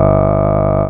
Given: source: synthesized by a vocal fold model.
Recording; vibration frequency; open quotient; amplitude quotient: sustained vowel; 50 Hz; 0.3; 1